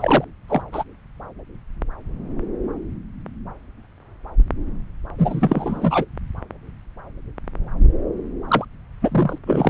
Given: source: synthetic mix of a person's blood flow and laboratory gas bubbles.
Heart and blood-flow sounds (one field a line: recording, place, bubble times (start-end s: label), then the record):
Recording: Doppler ultrasound of blood flow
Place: subclavian vein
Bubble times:
0.00-0.24 s: bubbles
0.48-0.61 s: bubbles
0.72-0.83 s: bubbles
5.18-6.06 s: bubbles
8.48-8.65 s: bubbles
9.01-9.38 s: bubbles
9.46-9.70 s: bubbles
From the record:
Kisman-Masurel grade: 223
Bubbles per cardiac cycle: several, 3 to 8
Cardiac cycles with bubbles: 10 to 50%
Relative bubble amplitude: loud (0.450 to 0.775)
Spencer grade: 2 (many but less than half of the cardiac periods contain bubble signals, singularly or in groups)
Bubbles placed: anywhere in the cardiac cycle